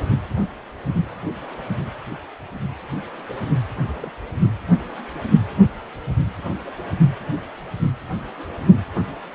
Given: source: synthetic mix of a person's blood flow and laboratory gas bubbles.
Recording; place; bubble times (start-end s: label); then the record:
Doppler ultrasound of blood flow; precordium
3.77-4.11 s: bubbles
From the record:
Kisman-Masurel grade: 111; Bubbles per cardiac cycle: 1 to 2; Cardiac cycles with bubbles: 1 to 10%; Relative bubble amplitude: barely perceptible (0.100 to 0.250); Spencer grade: 1 (occasional bubble signal discernible with the cardiac motion signal, with majority of cardiac periods free of bubbles); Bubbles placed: anywhere in the cardiac cycle